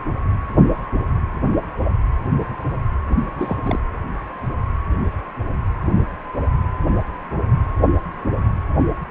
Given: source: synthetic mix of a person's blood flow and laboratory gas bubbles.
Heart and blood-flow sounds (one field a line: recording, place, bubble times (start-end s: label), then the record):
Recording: Doppler ultrasound of blood flow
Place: precordium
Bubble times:
3.09-3.23 s: bubbles
3.38-3.56 s: bubbles
3.65-3.79 s: bubbles
From the record:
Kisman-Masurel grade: 212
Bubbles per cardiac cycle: several, 3 to 8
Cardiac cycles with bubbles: 1 to 10%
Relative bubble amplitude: moderate (0.250 to 0.450)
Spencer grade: 1 (occasional bubble signal discernible with the cardiac motion signal, with majority of cardiac periods free of bubbles)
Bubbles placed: anywhere in the cardiac cycle